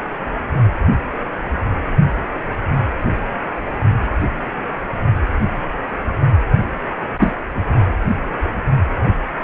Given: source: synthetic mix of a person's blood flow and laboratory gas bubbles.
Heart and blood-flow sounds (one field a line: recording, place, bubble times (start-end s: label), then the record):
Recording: Doppler ultrasound of blood flow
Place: precordium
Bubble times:
7.18-7.32 s: bubbles
7.55-7.62 s: bubbles
From the record:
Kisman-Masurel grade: 113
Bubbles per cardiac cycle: 1 to 2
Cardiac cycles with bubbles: 1 to 10%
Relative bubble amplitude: loud (0.450 to 0.775)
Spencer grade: 1 (occasional bubble signal discernible with the cardiac motion signal, with majority of cardiac periods free of bubbles)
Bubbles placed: anywhere in the cardiac cycle